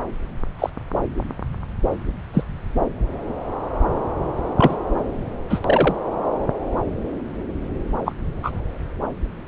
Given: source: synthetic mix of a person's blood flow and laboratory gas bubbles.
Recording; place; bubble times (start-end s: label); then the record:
Doppler ultrasound of blood flow; subclavian vein
0.58-0.70 s: bubbles
2.33-2.44 s: bubbles
4.57-4.75 s: bubbles
5.49-5.59 s: bubbles
5.65-5.95 s: bubbles
8.05-8.12 s: bubbles
8.43-8.51 s: bubbles
From the record:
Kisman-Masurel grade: 123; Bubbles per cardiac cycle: 1 to 2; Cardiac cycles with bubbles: 10 to 50%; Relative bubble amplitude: loud (0.450 to 0.775); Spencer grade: 2 (many but less than half of the cardiac periods contain bubble signals, singularly or in groups); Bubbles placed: anywhere in the cardiac cycle